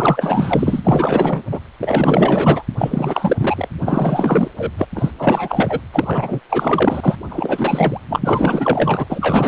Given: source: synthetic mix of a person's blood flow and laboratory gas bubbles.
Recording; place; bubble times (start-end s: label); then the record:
Doppler ultrasound of blood flow; precordium
0.00-1.42 s: bubbles
1.52-1.60 s: bubbles
1.81-2.63 s: bubbles
2.77-3.36 s: bubbles
3.39-3.68 s: bubbles
3.79-4.49 s: bubbles
4.58-4.72 s: bubbles
4.78-4.87 s: bubbles
4.95-5.11 s: bubbles
5.19-5.80 s: bubbles
5.93-6.40 s: bubbles
6.49-7.17 s: bubbles
7.29-8.00 s: bubbles
8.08-9.06 s: bubbles
9.10-9.48 s: bubbles
From the record:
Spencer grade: 4 (maximum detectable bubble signal sounding continuously throughout systole and diastole of every cardiac period, and overriding the amplitude of the normal cardiac signals); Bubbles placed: anywhere in the cardiac cycle